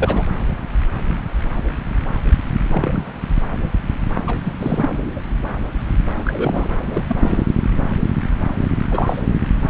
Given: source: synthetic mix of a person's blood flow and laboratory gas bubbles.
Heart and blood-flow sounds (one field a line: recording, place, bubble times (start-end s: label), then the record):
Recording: Doppler ultrasound of blood flow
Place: subclavian vein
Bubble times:
0.00-0.26 s: bubbles
2.67-3.03 s: bubbles
4.27-4.37 s: bubbles
4.44-4.54 s: bubbles
4.61-5.21 s: bubbles
6.15-6.68 s: bubbles
6.79-7.04 s: bubbles
7.08-7.47 s: bubbles
8.91-9.21 s: bubbles
9.27-9.42 s: bubbles
From the record:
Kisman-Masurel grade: 222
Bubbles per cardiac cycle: several, 3 to 8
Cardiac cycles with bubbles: 10 to 50%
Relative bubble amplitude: moderate (0.250 to 0.450)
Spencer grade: 2 (many but less than half of the cardiac periods contain bubble signals, singularly or in groups)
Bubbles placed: anywhere in the cardiac cycle